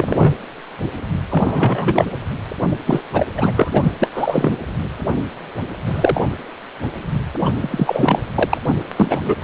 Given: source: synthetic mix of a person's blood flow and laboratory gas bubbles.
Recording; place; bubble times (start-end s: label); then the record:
Doppler ultrasound of blood flow; precordium
0.00-0.35 s: bubbles
1.29-2.04 s: bubbles
2.85-3.02 s: bubbles
3.12-3.26 s: bubbles
3.37-3.91 s: bubbles
3.99-4.11 s: bubbles
4.14-4.57 s: bubbles
5.86-6.22 s: bubbles
7.45-7.50 s: bubbles
7.61-8.17 s: bubbles
8.35-8.57 s: bubbles
8.65-8.76 s: bubbles
8.96-9.19 s: bubbles
9.23-9.36 s: bubbles
9.41-9.44 s: bubbles
From the record:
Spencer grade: 3 (all of the cardiac periods contain showers or single bubble signals, but not dominating or overriding the cardiac motion signals); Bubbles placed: anywhere in the cardiac cycle